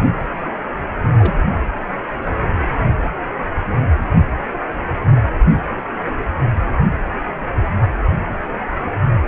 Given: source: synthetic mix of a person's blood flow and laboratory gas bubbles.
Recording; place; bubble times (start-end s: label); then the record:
Doppler ultrasound of blood flow; precordium
1.02-1.10 s: bubbles
1.18-1.35 s: bubbles
From the record:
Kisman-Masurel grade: 211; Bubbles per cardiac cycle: several, 3 to 8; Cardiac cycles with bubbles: 1 to 10%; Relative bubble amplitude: barely perceptible (0.100 to 0.250); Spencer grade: 1 (occasional bubble signal discernible with the cardiac motion signal, with majority of cardiac periods free of bubbles); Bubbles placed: anywhere in the cardiac cycle